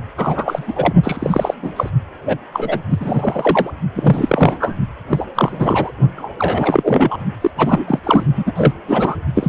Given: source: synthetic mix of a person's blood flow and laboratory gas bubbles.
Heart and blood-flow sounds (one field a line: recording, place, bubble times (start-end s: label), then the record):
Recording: Doppler ultrasound of blood flow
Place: precordium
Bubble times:
0.17-0.93 s: bubbles
1.03-1.54 s: bubbles
1.62-1.74 s: bubbles
1.76-1.90 s: bubbles
2.25-2.38 s: bubbles
2.53-2.79 s: bubbles
2.90-3.71 s: bubbles
3.93-4.75 s: bubbles
5.09-5.26 s: bubbles
5.35-5.92 s: bubbles
6.16-6.32 s: bubbles
6.38-7.17 s: bubbles
7.41-7.50 s: bubbles
7.57-7.84 s: bubbles
7.88-7.99 s: bubbles
8.04-8.23 s: bubbles
8.36-8.44 s: bubbles
8.46-8.53 s: bubbles
8.55-8.73 s: bubbles
8.88-9.15 s: bubbles
9.35-9.49 s: bubbles
From the record:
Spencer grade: 3 (all of the cardiac periods contain showers or single bubble signals, but not dominating or overriding the cardiac motion signals)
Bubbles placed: only in the low amplitude regions of the cardiac cycle